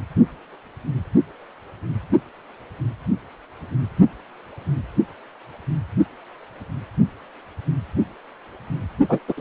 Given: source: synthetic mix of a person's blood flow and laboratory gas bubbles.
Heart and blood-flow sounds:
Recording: Doppler ultrasound of blood flow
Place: precordium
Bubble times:
9.09-9.19 s: bubbles
9.28-9.33 s: bubbles
9.37-9.41 s: bubbles
From the record:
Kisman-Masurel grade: 213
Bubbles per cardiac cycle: several, 3 to 8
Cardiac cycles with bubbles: 1 to 10%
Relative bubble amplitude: loud (0.450 to 0.775)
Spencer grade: 1 (occasional bubble signal discernible with the cardiac motion signal, with majority of cardiac periods free of bubbles)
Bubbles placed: only in the low amplitude regions of the cardiac cycle

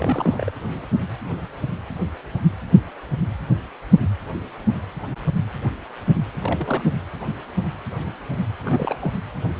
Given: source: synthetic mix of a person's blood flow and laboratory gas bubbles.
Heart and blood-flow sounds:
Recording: Doppler ultrasound of blood flow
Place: precordium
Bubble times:
0.00-0.51 s: bubbles
6.39-6.83 s: bubbles
8.64-8.96 s: bubbles
9.01-9.12 s: bubbles
From the record:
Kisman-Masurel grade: 221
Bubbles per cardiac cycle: several, 3 to 8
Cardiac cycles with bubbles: 10 to 50%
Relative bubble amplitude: barely perceptible (0.100 to 0.250)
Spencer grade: 2 (many but less than half of the cardiac periods contain bubble signals, singularly or in groups)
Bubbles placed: anywhere in the cardiac cycle

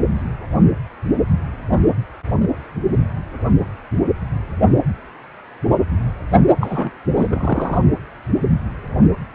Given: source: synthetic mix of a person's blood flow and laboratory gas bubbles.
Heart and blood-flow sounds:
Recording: Doppler ultrasound of blood flow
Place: precordium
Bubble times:
6.60-6.91 s: bubbles
7.16-7.82 s: bubbles
From the record:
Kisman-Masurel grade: 222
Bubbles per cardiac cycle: several, 3 to 8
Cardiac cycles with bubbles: 10 to 50%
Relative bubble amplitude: moderate (0.250 to 0.450)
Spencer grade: 2 (many but less than half of the cardiac periods contain bubble signals, singularly or in groups)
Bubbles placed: only in the low amplitude regions of the cardiac cycle

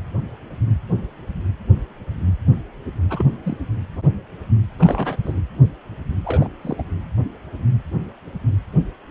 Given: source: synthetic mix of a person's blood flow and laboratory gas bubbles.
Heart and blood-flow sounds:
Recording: Doppler ultrasound of blood flow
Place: precordium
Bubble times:
3.09-3.26 s: bubbles
3.43-3.57 s: bubbles
4.79-5.17 s: bubbles
5.23-5.40 s: bubbles
6.25-6.48 s: bubbles
6.62-6.82 s: bubbles
From the record:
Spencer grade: 2 (many but less than half of the cardiac periods contain bubble signals, singularly or in groups)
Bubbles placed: anywhere in the cardiac cycle

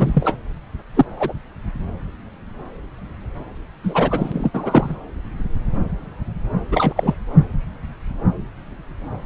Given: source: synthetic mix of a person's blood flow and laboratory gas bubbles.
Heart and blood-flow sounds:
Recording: Doppler ultrasound of blood flow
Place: subclavian vein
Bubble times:
0.00-0.35 s: bubbles
0.95-1.06 s: bubbles
1.17-1.33 s: bubbles
3.83-4.50 s: bubbles
4.54-4.96 s: bubbles
6.71-6.93 s: bubbles
6.96-7.14 s: bubbles
From the record:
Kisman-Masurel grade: 223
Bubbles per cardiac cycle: several, 3 to 8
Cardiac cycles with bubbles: 10 to 50%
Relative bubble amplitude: loud (0.450 to 0.775)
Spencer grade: 2 (many but less than half of the cardiac periods contain bubble signals, singularly or in groups)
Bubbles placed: anywhere in the cardiac cycle

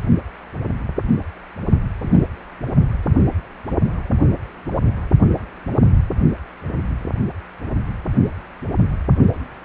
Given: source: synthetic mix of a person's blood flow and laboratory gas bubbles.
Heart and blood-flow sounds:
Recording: Doppler ultrasound of blood flow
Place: precordium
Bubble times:
2.02-2.27 s: bubbles
From the record:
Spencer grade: 1 (occasional bubble signal discernible with the cardiac motion signal, with majority of cardiac periods free of bubbles)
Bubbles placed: only in the low amplitude regions of the cardiac cycle

